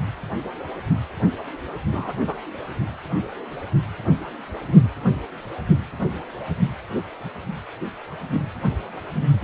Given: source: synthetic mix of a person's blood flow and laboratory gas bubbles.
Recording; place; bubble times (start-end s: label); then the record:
Doppler ultrasound of blood flow; precordium
1.91-2.14 s: bubbles
2.27-2.37 s: bubbles
From the record:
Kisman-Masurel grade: 111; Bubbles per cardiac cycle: 1 to 2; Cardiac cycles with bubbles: 1 to 10%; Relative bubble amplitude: barely perceptible (0.100 to 0.250); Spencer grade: 1 (occasional bubble signal discernible with the cardiac motion signal, with majority of cardiac periods free of bubbles); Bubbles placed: anywhere in the cardiac cycle